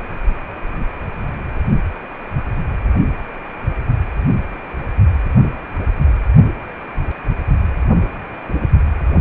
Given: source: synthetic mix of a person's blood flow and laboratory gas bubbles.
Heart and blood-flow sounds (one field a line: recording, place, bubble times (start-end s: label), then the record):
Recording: Doppler ultrasound of blood flow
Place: precordium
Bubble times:
no bubbles
From the record:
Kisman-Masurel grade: 000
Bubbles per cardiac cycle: 0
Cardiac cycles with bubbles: 0%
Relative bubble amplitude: no bubbles discernible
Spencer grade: 0 (complete lack of bubble signals)